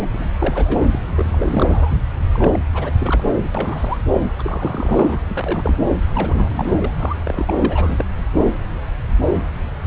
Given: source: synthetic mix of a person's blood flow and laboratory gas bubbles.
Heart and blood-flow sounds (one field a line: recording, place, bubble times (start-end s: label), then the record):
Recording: Doppler ultrasound of blood flow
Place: subclavian vein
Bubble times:
0.01-0.06 s: bubbles
0.12-0.29 s: bubbles
0.39-0.88 s: bubbles
0.91-1.00 s: bubbles
1.16-1.98 s: bubbles
2.32-2.60 s: bubbles
2.73-2.92 s: bubbles
3.00-3.23 s: bubbles
3.28-3.48 s: bubbles
3.54-3.98 s: bubbles
4.38-5.22 s: bubbles
5.31-5.76 s: bubbles
6.13-6.92 s: bubbles
6.97-7.17 s: bubbles
7.24-8.05 s: bubbles
From the record:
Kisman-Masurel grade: 332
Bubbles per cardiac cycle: rolling drumbeat, 9 or more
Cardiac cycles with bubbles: 50 to 99%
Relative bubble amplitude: moderate (0.250 to 0.450)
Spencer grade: 3 (all of the cardiac periods contain showers or single bubble signals, but not dominating or overriding the cardiac motion signals)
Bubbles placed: anywhere in the cardiac cycle